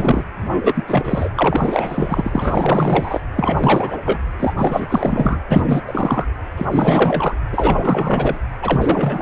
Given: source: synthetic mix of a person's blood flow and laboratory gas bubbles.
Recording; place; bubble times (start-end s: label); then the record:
Doppler ultrasound of blood flow; precordium
0.00-0.24 s: bubbles
0.40-0.84 s: bubbles
0.86-1.30 s: bubbles
1.36-3.21 s: bubbles
3.35-3.97 s: bubbles
4.04-4.19 s: bubbles
4.39-4.54 s: bubbles
4.58-4.87 s: bubbles
4.89-5.41 s: bubbles
5.50-5.81 s: bubbles
5.87-6.25 s: bubbles
6.57-6.67 s: bubbles
6.71-7.34 s: bubbles
7.52-8.40 s: bubbles
8.62-9.22 s: bubbles
From the record:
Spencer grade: 4 (maximum detectable bubble signal sounding continuously throughout systole and diastole of every cardiac period, and overriding the amplitude of the normal cardiac signals); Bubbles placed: anywhere in the cardiac cycle